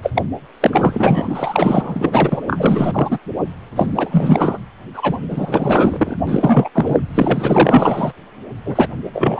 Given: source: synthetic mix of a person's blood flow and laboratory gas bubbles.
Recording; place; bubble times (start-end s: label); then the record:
Doppler ultrasound of blood flow; precordium
0.02-0.11 s: bubbles
0.15-0.24 s: bubbles
0.60-2.42 s: bubbles
2.46-3.19 s: bubbles
3.76-3.93 s: bubbles
3.95-4.58 s: bubbles
4.94-5.18 s: bubbles
5.31-6.17 s: bubbles
6.27-6.70 s: bubbles
6.74-7.00 s: bubbles
7.14-8.13 s: bubbles
8.66-8.88 s: bubbles
9.13-9.39 s: bubbles
From the record:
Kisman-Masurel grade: 444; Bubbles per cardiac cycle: continuous sound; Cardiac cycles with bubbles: 100%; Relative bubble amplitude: maximal (0.775 to 0.999); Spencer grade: 4 (maximum detectable bubble signal sounding continuously throughout systole and diastole of every cardiac period, and overriding the amplitude of the normal cardiac signals); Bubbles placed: anywhere in the cardiac cycle